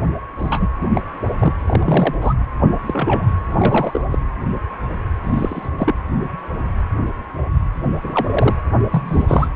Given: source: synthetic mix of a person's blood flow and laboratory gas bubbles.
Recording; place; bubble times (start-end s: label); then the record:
Doppler ultrasound of blood flow; precordium
0.38-0.68 s: bubbles
0.80-0.89 s: bubbles
0.93-1.01 s: bubbles
1.39-1.53 s: bubbles
1.66-2.14 s: bubbles
2.21-2.34 s: bubbles
2.86-3.27 s: bubbles
3.49-4.01 s: bubbles
4.10-4.18 s: bubbles
5.23-5.69 s: bubbles
5.78-5.93 s: bubbles
8.03-8.54 s: bubbles
8.90-9.49 s: bubbles
From the record:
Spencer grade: 3 (all of the cardiac periods contain showers or single bubble signals, but not dominating or overriding the cardiac motion signals); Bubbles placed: anywhere in the cardiac cycle